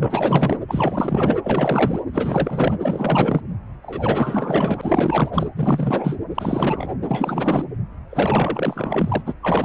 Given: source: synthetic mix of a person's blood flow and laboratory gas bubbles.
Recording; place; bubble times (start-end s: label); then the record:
Doppler ultrasound of blood flow; precordium
0.00-0.56 s: bubbles
0.67-1.39 s: bubbles
1.43-2.03 s: bubbles
2.13-2.73 s: bubbles
2.80-3.41 s: bubbles
3.82-5.30 s: bubbles
5.33-5.46 s: bubbles
5.55-6.17 s: bubbles
6.34-6.97 s: bubbles
7.01-7.64 s: bubbles
8.11-9.22 s: bubbles
9.26-9.33 s: bubbles
9.41-9.65 s: bubbles
From the record:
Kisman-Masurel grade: 444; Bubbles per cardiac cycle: continuous sound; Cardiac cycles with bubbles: 100%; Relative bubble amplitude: maximal (0.775 to 0.999); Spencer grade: 4 (maximum detectable bubble signal sounding continuously throughout systole and diastole of every cardiac period, and overriding the amplitude of the normal cardiac signals); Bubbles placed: anywhere in the cardiac cycle